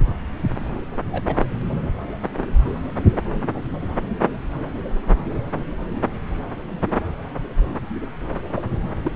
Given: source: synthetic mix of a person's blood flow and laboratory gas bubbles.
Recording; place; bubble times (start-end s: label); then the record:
Doppler ultrasound of blood flow; subclavian vein
1.11-1.24 s: bubbles
1.27-1.35 s: bubbles
8.54-8.62 s: bubbles
9.04-9.12 s: bubbles
From the record:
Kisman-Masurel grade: 122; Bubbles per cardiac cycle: 1 to 2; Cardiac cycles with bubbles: 10 to 50%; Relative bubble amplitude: moderate (0.250 to 0.450); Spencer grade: 2 (many but less than half of the cardiac periods contain bubble signals, singularly or in groups); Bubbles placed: anywhere in the cardiac cycle